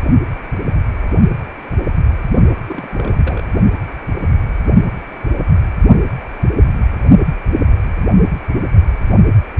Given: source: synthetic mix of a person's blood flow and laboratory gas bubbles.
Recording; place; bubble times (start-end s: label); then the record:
Doppler ultrasound of blood flow; precordium
2.68-3.44 s: bubbles
From the record:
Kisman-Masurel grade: 211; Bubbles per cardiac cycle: several, 3 to 8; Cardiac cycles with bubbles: 1 to 10%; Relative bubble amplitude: barely perceptible (0.100 to 0.250); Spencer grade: 1 (occasional bubble signal discernible with the cardiac motion signal, with majority of cardiac periods free of bubbles); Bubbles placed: only in the low amplitude regions of the cardiac cycle